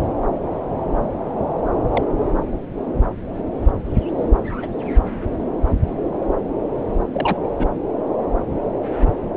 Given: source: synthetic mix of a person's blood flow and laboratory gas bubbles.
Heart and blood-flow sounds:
Doppler ultrasound of blood flow; subclavian vein
1.91-2.04 s: bubbles
4.62-4.66 s: bubbles
7.14-7.39 s: bubbles
7.58-7.67 s: bubbles
From the record:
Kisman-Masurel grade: 122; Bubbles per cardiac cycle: 1 to 2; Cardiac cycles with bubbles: 10 to 50%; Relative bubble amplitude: moderate (0.250 to 0.450); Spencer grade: 2 (many but less than half of the cardiac periods contain bubble signals, singularly or in groups); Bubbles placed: anywhere in the cardiac cycle

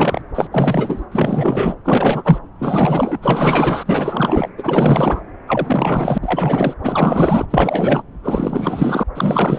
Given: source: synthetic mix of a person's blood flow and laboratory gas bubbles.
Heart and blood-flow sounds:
Doppler ultrasound of blood flow; subclavian vein
0.00-0.22 s: bubbles
0.35-0.47 s: bubbles
0.51-1.05 s: bubbles
1.11-1.76 s: bubbles
1.84-2.39 s: bubbles
2.58-3.18 s: bubbles
3.22-4.49 s: bubbles
4.57-5.22 s: bubbles
5.47-6.18 s: bubbles
6.21-6.74 s: bubbles
6.82-7.46 s: bubbles
7.50-8.03 s: bubbles
8.23-9.04 s: bubbles
9.14-9.59 s: bubbles
From the record:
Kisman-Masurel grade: 444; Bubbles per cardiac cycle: continuous sound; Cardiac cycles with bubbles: 100%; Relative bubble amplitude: maximal (0.775 to 0.999); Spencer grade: 4 (maximum detectable bubble signal sounding continuously throughout systole and diastole of every cardiac period, and overriding the amplitude of the normal cardiac signals); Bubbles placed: anywhere in the cardiac cycle

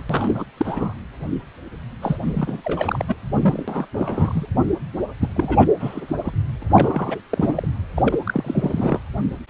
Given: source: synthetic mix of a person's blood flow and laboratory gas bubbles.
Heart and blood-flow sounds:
Doppler ultrasound of blood flow; precordium
0.09-0.45 s: bubbles
0.57-0.94 s: bubbles
2.01-2.18 s: bubbles
2.23-2.61 s: bubbles
2.65-3.05 s: bubbles
3.08-3.15 s: bubbles
3.33-3.86 s: bubbles
3.94-4.47 s: bubbles
5.20-5.29 s: bubbles
5.36-5.68 s: bubbles
5.79-6.01 s: bubbles
6.08-6.16 s: bubbles
6.25-6.32 s: bubbles
6.61-6.63 s: bubbles
6.72-7.21 s: bubbles
7.29-7.67 s: bubbles
7.97-8.02 s: bubbles
8.04-8.19 s: bubbles
8.26-8.99 s: bubbles
From the record:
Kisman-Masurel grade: 332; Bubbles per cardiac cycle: rolling drumbeat, 9 or more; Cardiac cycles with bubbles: 50 to 99%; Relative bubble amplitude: moderate (0.250 to 0.450); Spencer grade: 3 (all of the cardiac periods contain showers or single bubble signals, but not dominating or overriding the cardiac motion signals); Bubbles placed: anywhere in the cardiac cycle

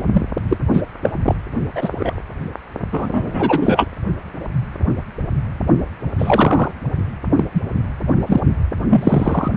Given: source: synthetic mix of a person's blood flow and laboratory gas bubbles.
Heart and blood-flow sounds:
Doppler ultrasound of blood flow; precordium
0.00-0.05 s: bubbles
0.13-0.25 s: bubbles
0.48-0.57 s: bubbles
0.73-0.83 s: bubbles
1.02-1.09 s: bubbles
1.25-1.35 s: bubbles
1.75-2.20 s: bubbles
2.92-3.87 s: bubbles
6.18-6.71 s: bubbles
7.35-7.44 s: bubbles
7.54-7.61 s: bubbles
8.26-8.41 s: bubbles
8.90-9.52 s: bubbles
From the record:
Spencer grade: 3 (all of the cardiac periods contain showers or single bubble signals, but not dominating or overriding the cardiac motion signals); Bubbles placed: only in the low amplitude regions of the cardiac cycle

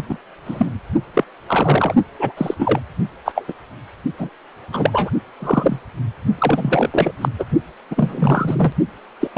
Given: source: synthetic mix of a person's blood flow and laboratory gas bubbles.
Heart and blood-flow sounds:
Doppler ultrasound of blood flow; precordium
0.09-0.17 s: bubbles
0.45-0.69 s: bubbles
1.14-1.24 s: bubbles
1.47-1.95 s: bubbles
2.19-2.32 s: bubbles
2.37-2.54 s: bubbles
2.58-2.80 s: bubbles
3.25-3.32 s: bubbles
3.35-3.44 s: bubbles
3.47-3.53 s: bubbles
4.19-4.29 s: bubbles
4.73-5.10 s: bubbles
5.40-5.79 s: bubbles
6.38-7.11 s: bubbles
7.21-7.29 s: bubbles
7.38-7.44 s: bubbles
7.90-8.72 s: bubbles
9.21-9.28 s: bubbles
9.33-9.37 s: bubbles
From the record:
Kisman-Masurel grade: 243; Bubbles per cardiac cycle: several, 3 to 8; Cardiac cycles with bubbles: 100%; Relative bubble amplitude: loud (0.450 to 0.775); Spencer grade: 3 (all of the cardiac periods contain showers or single bubble signals, but not dominating or overriding the cardiac motion signals); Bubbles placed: only in the low amplitude regions of the cardiac cycle

